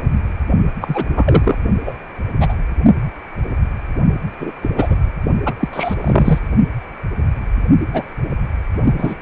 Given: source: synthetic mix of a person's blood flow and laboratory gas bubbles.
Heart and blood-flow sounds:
Doppler ultrasound of blood flow; precordium
0.81-1.04 s: bubbles
1.17-1.58 s: bubbles
1.85-1.96 s: bubbles
2.40-2.55 s: bubbles
4.38-4.53 s: bubbles
4.61-4.71 s: bubbles
4.75-4.98 s: bubbles
5.46-5.54 s: bubbles
5.59-5.68 s: bubbles
5.73-5.94 s: bubbles
6.00-6.39 s: bubbles
7.80-8.10 s: bubbles
8.85-8.94 s: bubbles
8.98-9.17 s: bubbles
From the record:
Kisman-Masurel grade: 233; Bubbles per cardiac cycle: several, 3 to 8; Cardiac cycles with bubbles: 50 to 99%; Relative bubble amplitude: loud (0.450 to 0.775); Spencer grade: 3 (all of the cardiac periods contain showers or single bubble signals, but not dominating or overriding the cardiac motion signals); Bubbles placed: only in the low amplitude regions of the cardiac cycle

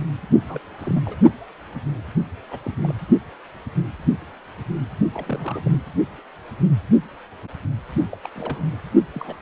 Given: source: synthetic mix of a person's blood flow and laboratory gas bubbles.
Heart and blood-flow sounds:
Doppler ultrasound of blood flow; precordium
0.41-0.60 s: bubbles
0.78-1.01 s: bubbles
1.05-1.16 s: bubbles
2.51-2.58 s: bubbles
2.65-2.71 s: bubbles
2.83-2.94 s: bubbles
5.13-5.77 s: bubbles
8.12-8.17 s: bubbles
8.25-8.29 s: bubbles
8.36-8.80 s: bubbles
9.14-9.37 s: bubbles
From the record:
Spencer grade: 2 (many but less than half of the cardiac periods contain bubble signals, singularly or in groups); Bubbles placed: only in the low amplitude regions of the cardiac cycle

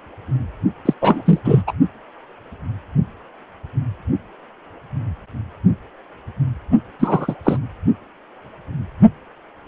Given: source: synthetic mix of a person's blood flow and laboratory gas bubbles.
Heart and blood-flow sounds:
Doppler ultrasound of blood flow; precordium
0.85-0.94 s: bubbles
1.01-1.41 s: bubbles
1.44-1.62 s: bubbles
1.67-1.73 s: bubbles
6.99-7.34 s: bubbles
7.44-7.57 s: bubbles
From the record:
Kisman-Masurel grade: 223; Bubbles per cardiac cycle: several, 3 to 8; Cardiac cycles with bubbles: 10 to 50%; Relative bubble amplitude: loud (0.450 to 0.775); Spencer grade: 2 (many but less than half of the cardiac periods contain bubble signals, singularly or in groups); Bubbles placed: only in the low amplitude regions of the cardiac cycle

